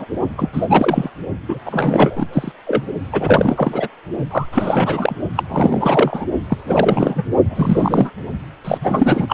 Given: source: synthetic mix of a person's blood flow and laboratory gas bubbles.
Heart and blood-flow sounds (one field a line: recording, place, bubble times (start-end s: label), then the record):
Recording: Doppler ultrasound of blood flow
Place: precordium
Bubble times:
0.00-0.05 s: bubbles
0.38-0.49 s: bubbles
0.52-1.10 s: bubbles
1.48-1.59 s: bubbles
1.66-2.25 s: bubbles
2.32-2.52 s: bubbles
2.67-2.81 s: bubbles
3.04-3.88 s: bubbles
4.30-4.46 s: bubbles
4.52-5.16 s: bubbles
5.36-5.43 s: bubbles
5.48-6.25 s: bubbles
6.49-6.58 s: bubbles
6.67-7.25 s: bubbles
7.50-8.10 s: bubbles
8.65-8.78 s: bubbles
8.81-9.33 s: bubbles
From the record:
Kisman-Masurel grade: 343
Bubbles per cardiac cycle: rolling drumbeat, 9 or more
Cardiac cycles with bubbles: 100%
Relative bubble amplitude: loud (0.450 to 0.775)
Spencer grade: 3 (all of the cardiac periods contain showers or single bubble signals, but not dominating or overriding the cardiac motion signals)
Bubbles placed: only in the low amplitude regions of the cardiac cycle